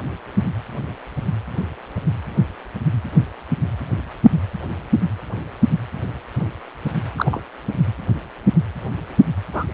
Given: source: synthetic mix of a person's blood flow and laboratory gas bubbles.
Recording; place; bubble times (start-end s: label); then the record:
Doppler ultrasound of blood flow; precordium
7.17-7.41 s: bubbles
9.53-9.65 s: bubbles
From the record:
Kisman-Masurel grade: 122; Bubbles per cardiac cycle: 1 to 2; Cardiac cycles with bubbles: 10 to 50%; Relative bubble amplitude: moderate (0.250 to 0.450); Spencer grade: 2 (many but less than half of the cardiac periods contain bubble signals, singularly or in groups); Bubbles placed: anywhere in the cardiac cycle